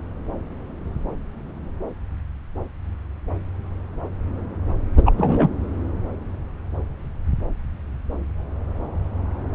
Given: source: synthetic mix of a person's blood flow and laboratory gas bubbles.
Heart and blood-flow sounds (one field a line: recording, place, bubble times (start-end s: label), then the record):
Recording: Doppler ultrasound of blood flow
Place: subclavian vein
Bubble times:
4.96-5.02 s: bubbles
5.05-5.12 s: bubbles
5.17-5.48 s: bubbles
From the record:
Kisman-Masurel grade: 213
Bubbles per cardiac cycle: several, 3 to 8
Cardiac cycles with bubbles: 1 to 10%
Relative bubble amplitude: loud (0.450 to 0.775)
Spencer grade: 1 (occasional bubble signal discernible with the cardiac motion signal, with majority of cardiac periods free of bubbles)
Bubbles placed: anywhere in the cardiac cycle